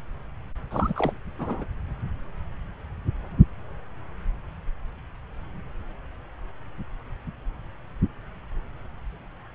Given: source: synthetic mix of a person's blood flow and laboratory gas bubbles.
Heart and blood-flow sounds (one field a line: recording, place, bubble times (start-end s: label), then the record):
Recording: Doppler ultrasound of blood flow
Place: subclavian vein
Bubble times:
0.70-1.13 s: bubbles
1.39-1.66 s: bubbles
From the record:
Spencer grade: 1 (occasional bubble signal discernible with the cardiac motion signal, with majority of cardiac periods free of bubbles)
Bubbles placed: anywhere in the cardiac cycle